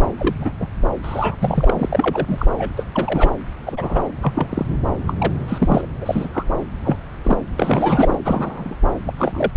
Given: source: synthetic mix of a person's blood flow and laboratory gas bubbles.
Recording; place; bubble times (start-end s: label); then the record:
Doppler ultrasound of blood flow; subclavian vein
0.18-0.35 s: bubbles
0.39-0.52 s: bubbles
0.59-0.66 s: bubbles
1.02-1.36 s: bubbles
1.39-1.89 s: bubbles
1.92-2.46 s: bubbles
2.58-2.69 s: bubbles
2.76-2.84 s: bubbles
2.94-3.31 s: bubbles
3.66-4.02 s: bubbles
4.22-4.66 s: bubbles
5.07-5.13 s: bubbles
5.19-5.33 s: bubbles
5.48-5.88 s: bubbles
6.01-6.28 s: bubbles
6.33-6.44 s: bubbles
6.83-6.97 s: bubbles
7.25-7.38 s: bubbles
7.56-8.20 s: bubbles
8.24-8.76 s: bubbles
9.06-9.13 s: bubbles
9.16-9.51 s: bubbles
From the record:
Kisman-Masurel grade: 242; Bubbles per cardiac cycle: several, 3 to 8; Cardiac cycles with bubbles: 100%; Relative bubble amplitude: moderate (0.250 to 0.450); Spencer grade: 3 (all of the cardiac periods contain showers or single bubble signals, but not dominating or overriding the cardiac motion signals); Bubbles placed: anywhere in the cardiac cycle